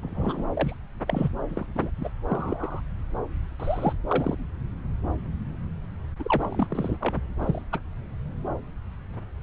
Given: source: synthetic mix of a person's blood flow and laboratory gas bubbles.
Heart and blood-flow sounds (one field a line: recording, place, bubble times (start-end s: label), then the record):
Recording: Doppler ultrasound of blood flow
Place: subclavian vein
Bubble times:
0.02-0.45 s: bubbles
0.50-0.77 s: bubbles
1.06-1.31 s: bubbles
1.48-1.66 s: bubbles
1.75-1.91 s: bubbles
1.97-2.09 s: bubbles
2.30-2.82 s: bubbles
3.59-3.93 s: bubbles
4.08-4.36 s: bubbles
6.19-6.98 s: bubbles
7.00-7.15 s: bubbles
7.39-7.62 s: bubbles
7.72-7.80 s: bubbles
From the record:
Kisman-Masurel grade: 232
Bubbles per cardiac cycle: several, 3 to 8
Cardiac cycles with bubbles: 50 to 99%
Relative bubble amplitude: moderate (0.250 to 0.450)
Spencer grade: 3 (all of the cardiac periods contain showers or single bubble signals, but not dominating or overriding the cardiac motion signals)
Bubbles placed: anywhere in the cardiac cycle